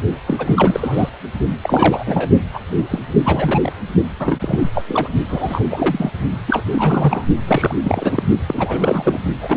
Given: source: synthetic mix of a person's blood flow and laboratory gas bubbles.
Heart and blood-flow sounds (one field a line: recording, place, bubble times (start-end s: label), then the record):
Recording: Doppler ultrasound of blood flow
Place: precordium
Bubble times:
0.28-1.10 s: bubbles
1.62-2.30 s: bubbles
2.53-2.58 s: bubbles
2.76-2.84 s: bubbles
2.90-3.00 s: bubbles
3.24-3.73 s: bubbles
4.20-4.70 s: bubbles
4.74-4.83 s: bubbles
4.88-5.08 s: bubbles
5.28-5.65 s: bubbles
5.71-6.11 s: bubbles
6.47-6.64 s: bubbles
6.72-7.25 s: bubbles
7.48-7.74 s: bubbles
7.84-8.23 s: bubbles
8.47-9.21 s: bubbles
9.41-9.57 s: bubbles
From the record:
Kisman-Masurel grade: 342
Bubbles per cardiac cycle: rolling drumbeat, 9 or more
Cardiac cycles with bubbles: 100%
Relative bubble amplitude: moderate (0.250 to 0.450)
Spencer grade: 3 (all of the cardiac periods contain showers or single bubble signals, but not dominating or overriding the cardiac motion signals)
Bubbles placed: only in the low amplitude regions of the cardiac cycle